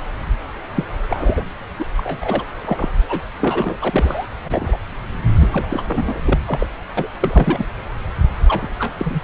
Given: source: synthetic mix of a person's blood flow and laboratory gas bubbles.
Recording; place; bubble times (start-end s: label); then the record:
Doppler ultrasound of blood flow; subclavian vein
0.75-0.85 s: bubbles
1.08-1.50 s: bubbles
1.79-1.85 s: bubbles
1.97-2.18 s: bubbles
2.21-2.44 s: bubbles
2.65-2.89 s: bubbles
3.08-3.20 s: bubbles
3.40-3.77 s: bubbles
3.81-4.26 s: bubbles
4.43-4.77 s: bubbles
5.40-5.48 s: bubbles
5.52-5.67 s: bubbles
5.69-5.82 s: bubbles
5.87-6.21 s: bubbles
6.25-6.39 s: bubbles
6.46-6.67 s: bubbles
6.97-7.07 s: bubbles
7.21-7.66 s: bubbles
8.48-8.67 s: bubbles
8.79-8.93 s: bubbles
8.98-9.21 s: bubbles
From the record:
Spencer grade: 3 (all of the cardiac periods contain showers or single bubble signals, but not dominating or overriding the cardiac motion signals); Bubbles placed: anywhere in the cardiac cycle